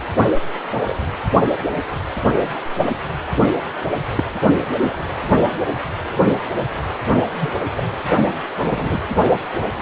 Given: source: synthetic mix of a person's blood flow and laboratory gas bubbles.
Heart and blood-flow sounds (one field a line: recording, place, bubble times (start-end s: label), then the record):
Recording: Doppler ultrasound of blood flow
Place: precordium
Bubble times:
0.85-0.95 s: bubbles
4.17-4.24 s: bubbles
4.81-4.96 s: bubbles
5.31-5.42 s: bubbles
7.33-7.51 s: bubbles
7.76-7.83 s: bubbles
8.57-8.98 s: bubbles
9.29-9.36 s: bubbles
9.76-9.82 s: bubbles
From the record:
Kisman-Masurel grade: 122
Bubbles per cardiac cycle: 1 to 2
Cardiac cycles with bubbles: 10 to 50%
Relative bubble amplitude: moderate (0.250 to 0.450)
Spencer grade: 2 (many but less than half of the cardiac periods contain bubble signals, singularly or in groups)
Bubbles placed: only in the low amplitude regions of the cardiac cycle